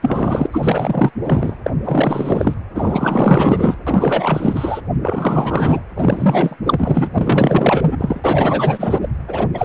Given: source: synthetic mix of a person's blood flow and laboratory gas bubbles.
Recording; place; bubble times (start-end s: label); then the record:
Doppler ultrasound of blood flow; precordium
0.00-0.48 s: bubbles
0.51-1.10 s: bubbles
1.24-1.56 s: bubbles
1.66-1.71 s: bubbles
1.84-2.54 s: bubbles
2.74-3.77 s: bubbles
3.86-4.81 s: bubbles
5.02-5.79 s: bubbles
5.96-6.56 s: bubbles
6.64-7.11 s: bubbles
7.14-9.11 s: bubbles
9.27-9.47 s: bubbles
9.54-9.65 s: bubbles
From the record:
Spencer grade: 4 (maximum detectable bubble signal sounding continuously throughout systole and diastole of every cardiac period, and overriding the amplitude of the normal cardiac signals); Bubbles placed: anywhere in the cardiac cycle